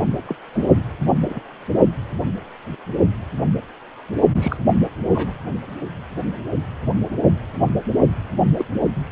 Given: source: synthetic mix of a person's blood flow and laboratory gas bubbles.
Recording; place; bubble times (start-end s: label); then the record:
Doppler ultrasound of blood flow; precordium
0.28-0.35 s: bubbles
0.53-0.68 s: bubbles
1.29-1.42 s: bubbles
4.35-4.57 s: bubbles
5.10-5.32 s: bubbles
8.56-8.65 s: bubbles
From the record:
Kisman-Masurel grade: 222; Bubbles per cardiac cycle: several, 3 to 8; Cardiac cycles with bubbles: 10 to 50%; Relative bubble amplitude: moderate (0.250 to 0.450); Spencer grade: 2 (many but less than half of the cardiac periods contain bubble signals, singularly or in groups); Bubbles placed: only in the low amplitude regions of the cardiac cycle